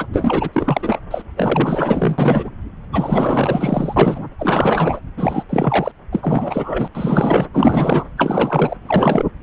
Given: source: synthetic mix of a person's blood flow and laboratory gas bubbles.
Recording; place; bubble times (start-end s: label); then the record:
Doppler ultrasound of blood flow; subclavian vein
0.00-0.06 s: bubbles
0.12-0.50 s: bubbles
0.52-0.98 s: bubbles
1.10-1.22 s: bubbles
1.36-2.50 s: bubbles
2.92-4.26 s: bubbles
4.38-5.00 s: bubbles
5.17-5.43 s: bubbles
5.49-5.92 s: bubbles
6.12-6.88 s: bubbles
6.95-7.46 s: bubbles
7.54-8.04 s: bubbles
8.17-8.77 s: bubbles
8.82-9.24 s: bubbles
9.41-9.43 s: bubbles
From the record:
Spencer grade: 4 (maximum detectable bubble signal sounding continuously throughout systole and diastole of every cardiac period, and overriding the amplitude of the normal cardiac signals); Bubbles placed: anywhere in the cardiac cycle